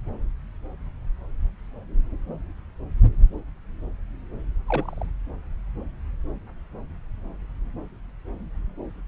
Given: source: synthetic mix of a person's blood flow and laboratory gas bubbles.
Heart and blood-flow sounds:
Doppler ultrasound of blood flow; subclavian vein
4.67-4.95 s: bubbles
4.97-5.05 s: bubbles
From the record:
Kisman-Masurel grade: 111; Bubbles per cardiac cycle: 1 to 2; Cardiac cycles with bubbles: 1 to 10%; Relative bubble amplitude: barely perceptible (0.100 to 0.250); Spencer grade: 1 (occasional bubble signal discernible with the cardiac motion signal, with majority of cardiac periods free of bubbles); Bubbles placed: anywhere in the cardiac cycle

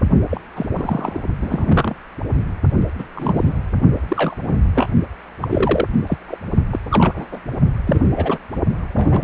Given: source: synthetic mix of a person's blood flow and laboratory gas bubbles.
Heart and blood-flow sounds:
Doppler ultrasound of blood flow; precordium
0.30-0.41 s: bubbles
0.55-0.66 s: bubbles
0.75-1.22 s: bubbles
1.41-1.96 s: bubbles
2.98-3.04 s: bubbles
3.15-3.54 s: bubbles
4.08-4.36 s: bubbles
4.43-4.57 s: bubbles
4.74-4.87 s: bubbles
5.42-5.47 s: bubbles
5.50-5.85 s: bubbles
6.06-6.17 s: bubbles
6.28-6.38 s: bubbles
6.71-6.79 s: bubbles
6.89-7.40 s: bubbles
7.87-7.99 s: bubbles
8.16-8.39 s: bubbles
8.95-9.24 s: bubbles
From the record:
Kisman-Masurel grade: 242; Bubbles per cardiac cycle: several, 3 to 8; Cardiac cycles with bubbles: 100%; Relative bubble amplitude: moderate (0.250 to 0.450); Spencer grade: 3 (all of the cardiac periods contain showers or single bubble signals, but not dominating or overriding the cardiac motion signals); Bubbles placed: only in the low amplitude regions of the cardiac cycle

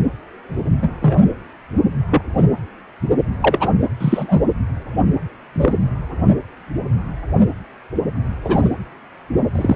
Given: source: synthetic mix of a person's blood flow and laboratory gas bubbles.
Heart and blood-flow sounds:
Doppler ultrasound of blood flow; precordium
0.81-0.89 s: bubbles
1.02-1.22 s: bubbles
2.10-2.22 s: bubbles
2.37-2.44 s: bubbles
3.42-3.70 s: bubbles
4.00-4.41 s: bubbles
5.54-5.77 s: bubbles
8.44-8.69 s: bubbles
9.55-9.76 s: bubbles
From the record:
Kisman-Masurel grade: 123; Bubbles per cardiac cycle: 1 to 2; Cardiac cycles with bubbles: 10 to 50%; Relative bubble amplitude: loud (0.450 to 0.775); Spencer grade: 2 (many but less than half of the cardiac periods contain bubble signals, singularly or in groups); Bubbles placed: anywhere in the cardiac cycle

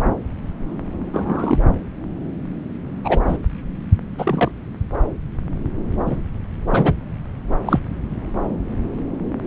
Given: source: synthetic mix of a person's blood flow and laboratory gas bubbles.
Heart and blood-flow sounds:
Doppler ultrasound of blood flow; subclavian vein
1.12-1.59 s: bubbles
3.04-3.21 s: bubbles
3.28-3.37 s: bubbles
4.18-4.51 s: bubbles
6.06-6.17 s: bubbles
6.70-6.94 s: bubbles
7.65-7.79 s: bubbles
From the record:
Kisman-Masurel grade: 123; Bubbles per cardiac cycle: 1 to 2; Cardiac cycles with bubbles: 10 to 50%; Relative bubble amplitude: loud (0.450 to 0.775); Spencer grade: 2 (many but less than half of the cardiac periods contain bubble signals, singularly or in groups); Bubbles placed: anywhere in the cardiac cycle

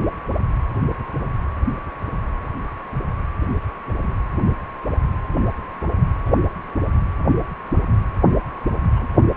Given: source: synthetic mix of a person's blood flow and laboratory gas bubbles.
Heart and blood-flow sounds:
Doppler ultrasound of blood flow; precordium
3.89-4.26 s: bubbles
6.25-6.31 s: bubbles
8.92-9.08 s: bubbles
From the record:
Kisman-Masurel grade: 121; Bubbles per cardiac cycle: 1 to 2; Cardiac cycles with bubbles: 10 to 50%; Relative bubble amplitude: barely perceptible (0.100 to 0.250); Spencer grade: 2 (many but less than half of the cardiac periods contain bubble signals, singularly or in groups); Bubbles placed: anywhere in the cardiac cycle

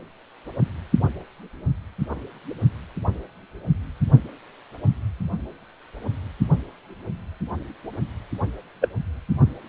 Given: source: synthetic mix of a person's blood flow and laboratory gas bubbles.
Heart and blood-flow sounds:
Doppler ultrasound of blood flow; precordium
8.81-8.88 s: bubbles
From the record:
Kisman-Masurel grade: 123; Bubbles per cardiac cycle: 1 to 2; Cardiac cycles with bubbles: 10 to 50%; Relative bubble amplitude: loud (0.450 to 0.775); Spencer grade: 2 (many but less than half of the cardiac periods contain bubble signals, singularly or in groups); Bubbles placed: only in the low amplitude regions of the cardiac cycle

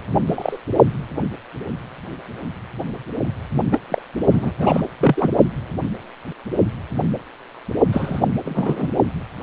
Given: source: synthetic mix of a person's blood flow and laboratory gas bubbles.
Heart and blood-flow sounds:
Doppler ultrasound of blood flow; precordium
0.29-0.57 s: bubbles
3.71-3.79 s: bubbles
3.88-4.02 s: bubbles
4.31-4.52 s: bubbles
4.60-4.82 s: bubbles
5.00-5.31 s: bubbles
7.92-8.21 s: bubbles
8.45-8.89 s: bubbles
From the record:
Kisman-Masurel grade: 223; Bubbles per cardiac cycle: several, 3 to 8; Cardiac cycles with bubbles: 10 to 50%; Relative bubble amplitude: loud (0.450 to 0.775); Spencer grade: 2 (many but less than half of the cardiac periods contain bubble signals, singularly or in groups); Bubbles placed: only in the low amplitude regions of the cardiac cycle

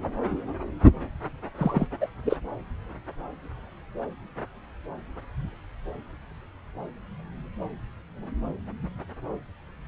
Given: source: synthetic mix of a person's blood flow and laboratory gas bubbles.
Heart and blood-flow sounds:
Doppler ultrasound of blood flow; subclavian vein
1.57-1.87 s: bubbles
2.01-2.08 s: bubbles
2.25-2.37 s: bubbles
From the record:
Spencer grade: 1 (occasional bubble signal discernible with the cardiac motion signal, with majority of cardiac periods free of bubbles); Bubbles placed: anywhere in the cardiac cycle

